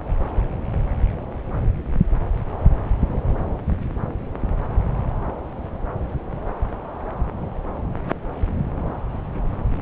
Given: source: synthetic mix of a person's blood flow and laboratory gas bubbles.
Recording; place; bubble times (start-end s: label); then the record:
Doppler ultrasound of blood flow; subclavian vein
no bubbles
From the record:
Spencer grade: 0 (complete lack of bubble signals)